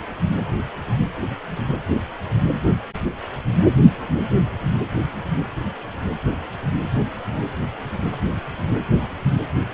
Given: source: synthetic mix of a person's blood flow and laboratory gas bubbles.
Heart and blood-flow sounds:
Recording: Doppler ultrasound of blood flow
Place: precordium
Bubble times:
no bubbles
From the record:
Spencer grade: 0 (complete lack of bubble signals)

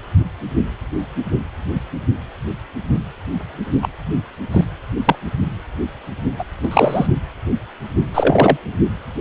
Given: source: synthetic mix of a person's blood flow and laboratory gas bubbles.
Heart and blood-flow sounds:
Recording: Doppler ultrasound of blood flow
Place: precordium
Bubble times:
3.81-3.88 s: bubbles
4.51-4.64 s: bubbles
5.05-5.15 s: bubbles
6.38-6.44 s: bubbles
6.63-6.68 s: bubbles
6.71-7.06 s: bubbles
8.14-8.57 s: bubbles
From the record:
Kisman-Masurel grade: 223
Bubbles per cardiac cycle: several, 3 to 8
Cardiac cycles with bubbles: 10 to 50%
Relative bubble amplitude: loud (0.450 to 0.775)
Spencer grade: 2 (many but less than half of the cardiac periods contain bubble signals, singularly or in groups)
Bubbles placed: only in the low amplitude regions of the cardiac cycle

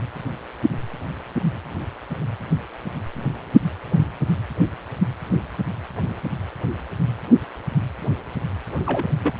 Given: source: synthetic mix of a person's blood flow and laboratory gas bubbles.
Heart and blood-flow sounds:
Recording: Doppler ultrasound of blood flow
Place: precordium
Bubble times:
8.85-9.12 s: bubbles
9.23-9.33 s: bubbles
From the record:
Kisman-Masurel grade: 211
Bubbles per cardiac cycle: several, 3 to 8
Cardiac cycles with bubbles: 1 to 10%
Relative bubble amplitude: barely perceptible (0.100 to 0.250)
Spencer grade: 1 (occasional bubble signal discernible with the cardiac motion signal, with majority of cardiac periods free of bubbles)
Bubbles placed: anywhere in the cardiac cycle

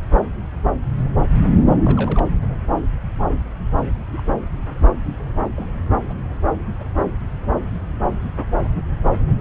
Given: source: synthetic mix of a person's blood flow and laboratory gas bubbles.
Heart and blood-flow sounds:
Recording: Doppler ultrasound of blood flow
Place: subclavian vein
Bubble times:
1.84-2.26 s: bubbles
4.12-4.22 s: bubbles
5.56-5.70 s: bubbles
6.09-6.14 s: bubbles
From the record:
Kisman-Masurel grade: 121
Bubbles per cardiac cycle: 1 to 2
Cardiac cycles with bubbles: 10 to 50%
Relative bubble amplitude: barely perceptible (0.100 to 0.250)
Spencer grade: 2 (many but less than half of the cardiac periods contain bubble signals, singularly or in groups)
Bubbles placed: anywhere in the cardiac cycle

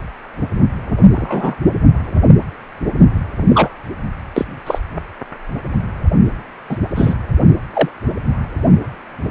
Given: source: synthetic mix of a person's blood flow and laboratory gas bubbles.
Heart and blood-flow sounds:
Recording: Doppler ultrasound of blood flow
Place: precordium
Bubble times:
1.16-1.56 s: bubbles
3.49-3.69 s: bubbles
4.36-4.45 s: bubbles
4.66-4.79 s: bubbles
6.69-6.77 s: bubbles
6.95-7.15 s: bubbles
7.73-7.89 s: bubbles
From the record:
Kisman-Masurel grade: 123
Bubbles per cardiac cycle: 1 to 2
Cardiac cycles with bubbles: 10 to 50%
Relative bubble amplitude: loud (0.450 to 0.775)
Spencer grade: 2 (many but less than half of the cardiac periods contain bubble signals, singularly or in groups)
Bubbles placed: anywhere in the cardiac cycle

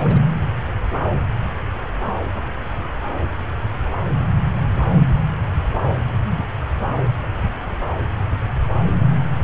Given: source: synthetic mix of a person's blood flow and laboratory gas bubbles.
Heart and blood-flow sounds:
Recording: Doppler ultrasound of blood flow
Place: subclavian vein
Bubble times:
0.00-0.20 s: bubbles
From the record:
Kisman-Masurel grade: 211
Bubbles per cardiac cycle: several, 3 to 8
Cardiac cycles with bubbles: 1 to 10%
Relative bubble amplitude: barely perceptible (0.100 to 0.250)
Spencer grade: 1 (occasional bubble signal discernible with the cardiac motion signal, with majority of cardiac periods free of bubbles)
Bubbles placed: anywhere in the cardiac cycle

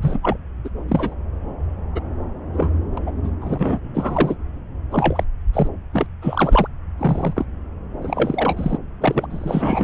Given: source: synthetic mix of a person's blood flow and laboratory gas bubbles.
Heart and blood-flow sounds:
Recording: Doppler ultrasound of blood flow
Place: subclavian vein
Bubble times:
0.01-0.18 s: bubbles
0.23-0.37 s: bubbles
0.65-0.69 s: bubbles
0.88-1.14 s: bubbles
1.95-2.00 s: bubbles
2.54-2.69 s: bubbles
2.97-3.00 s: bubbles
3.06-3.11 s: bubbles
3.23-3.30 s: bubbles
3.41-3.79 s: bubbles
3.94-4.35 s: bubbles
4.91-5.24 s: bubbles
5.53-5.68 s: bubbles
5.93-6.07 s: bubbles
6.22-6.68 s: bubbles
6.98-7.45 s: bubbles
8.01-8.78 s: bubbles
9.01-9.27 s: bubbles
9.30-9.84 s: bubbles
From the record:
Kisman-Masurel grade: 242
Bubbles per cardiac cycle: several, 3 to 8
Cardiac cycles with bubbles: 100%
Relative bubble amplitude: moderate (0.250 to 0.450)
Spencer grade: 3 (all of the cardiac periods contain showers or single bubble signals, but not dominating or overriding the cardiac motion signals)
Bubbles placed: anywhere in the cardiac cycle

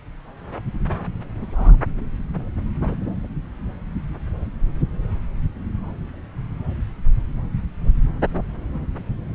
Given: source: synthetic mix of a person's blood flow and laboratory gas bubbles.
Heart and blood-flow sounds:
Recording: Doppler ultrasound of blood flow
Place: subclavian vein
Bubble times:
1.38-1.77 s: bubbles
2.81-2.95 s: bubbles
From the record:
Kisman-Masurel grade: 121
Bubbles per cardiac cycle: 1 to 2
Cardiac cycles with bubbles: 10 to 50%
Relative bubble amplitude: barely perceptible (0.100 to 0.250)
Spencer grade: 2 (many but less than half of the cardiac periods contain bubble signals, singularly or in groups)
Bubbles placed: anywhere in the cardiac cycle

